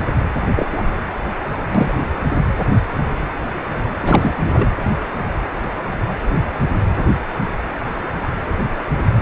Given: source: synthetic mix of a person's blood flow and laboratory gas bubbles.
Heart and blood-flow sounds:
Doppler ultrasound of blood flow; precordium
0.56-0.66 s: bubbles
0.72-0.83 s: bubbles
1.75-1.96 s: bubbles
4.02-4.67 s: bubbles
From the record:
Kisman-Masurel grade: 223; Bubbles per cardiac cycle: several, 3 to 8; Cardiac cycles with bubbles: 10 to 50%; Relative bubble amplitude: loud (0.450 to 0.775); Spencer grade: 2 (many but less than half of the cardiac periods contain bubble signals, singularly or in groups); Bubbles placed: anywhere in the cardiac cycle

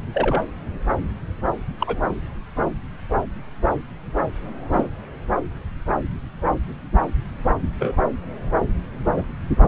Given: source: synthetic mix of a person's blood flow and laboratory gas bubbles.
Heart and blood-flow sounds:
Doppler ultrasound of blood flow; subclavian vein
0.14-0.42 s: bubbles
1.80-2.01 s: bubbles
4.71-4.88 s: bubbles
7.79-7.95 s: bubbles
9.12-9.24 s: bubbles
From the record:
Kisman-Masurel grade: 122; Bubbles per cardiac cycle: 1 to 2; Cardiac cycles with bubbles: 10 to 50%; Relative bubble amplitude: moderate (0.250 to 0.450); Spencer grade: 2 (many but less than half of the cardiac periods contain bubble signals, singularly or in groups); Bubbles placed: anywhere in the cardiac cycle

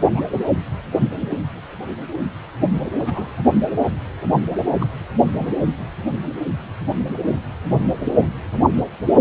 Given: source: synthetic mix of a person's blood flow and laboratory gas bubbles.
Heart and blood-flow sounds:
Doppler ultrasound of blood flow; precordium
0.14-0.23 s: bubbles
1.21-1.35 s: bubbles
2.98-3.30 s: bubbles
4.79-4.88 s: bubbles
5.33-5.45 s: bubbles
From the record:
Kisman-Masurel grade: 121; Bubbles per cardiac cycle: 1 to 2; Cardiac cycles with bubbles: 10 to 50%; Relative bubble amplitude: barely perceptible (0.100 to 0.250); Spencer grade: 2 (many but less than half of the cardiac periods contain bubble signals, singularly or in groups); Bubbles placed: anywhere in the cardiac cycle

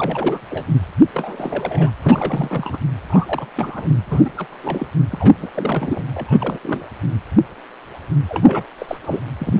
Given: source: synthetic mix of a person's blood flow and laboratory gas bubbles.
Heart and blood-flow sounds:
Doppler ultrasound of blood flow; precordium
0.00-0.40 s: bubbles
0.50-0.65 s: bubbles
1.14-1.92 s: bubbles
2.03-2.79 s: bubbles
3.08-3.46 s: bubbles
3.56-3.88 s: bubbles
4.05-4.32 s: bubbles
4.37-4.47 s: bubbles
4.50-4.87 s: bubbles
5.10-5.34 s: bubbles
5.40-5.49 s: bubbles
5.54-6.05 s: bubbles
6.13-6.58 s: bubbles
6.62-6.87 s: bubbles
8.28-8.64 s: bubbles
8.78-8.97 s: bubbles
9.04-9.20 s: bubbles
9.39-9.53 s: bubbles
9.56-9.60 s: bubbles
From the record:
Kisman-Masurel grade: 332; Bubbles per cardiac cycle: rolling drumbeat, 9 or more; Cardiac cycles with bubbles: 50 to 99%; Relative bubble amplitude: moderate (0.250 to 0.450); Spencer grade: 3 (all of the cardiac periods contain showers or single bubble signals, but not dominating or overriding the cardiac motion signals); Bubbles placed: anywhere in the cardiac cycle

